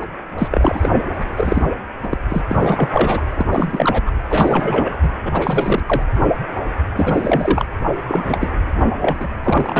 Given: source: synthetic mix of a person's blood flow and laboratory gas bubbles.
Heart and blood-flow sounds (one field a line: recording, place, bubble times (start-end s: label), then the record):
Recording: Doppler ultrasound of blood flow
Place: precordium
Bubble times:
0.00-0.05 s: bubbles
0.38-0.48 s: bubbles
0.50-0.91 s: bubbles
1.36-1.67 s: bubbles
2.03-2.18 s: bubbles
2.29-2.42 s: bubbles
2.48-2.90 s: bubbles
2.93-3.21 s: bubbles
3.34-3.46 s: bubbles
3.52-4.11 s: bubbles
4.29-4.96 s: bubbles
5.02-5.09 s: bubbles
5.25-5.82 s: bubbles
5.86-6.03 s: bubbles
6.96-7.67 s: bubbles
8.09-8.54 s: bubbles
9.02-9.28 s: bubbles
9.43-9.80 s: bubbles
From the record:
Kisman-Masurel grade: 343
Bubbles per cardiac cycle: rolling drumbeat, 9 or more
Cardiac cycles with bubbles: 100%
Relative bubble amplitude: loud (0.450 to 0.775)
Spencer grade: 3 (all of the cardiac periods contain showers or single bubble signals, but not dominating or overriding the cardiac motion signals)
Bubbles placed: anywhere in the cardiac cycle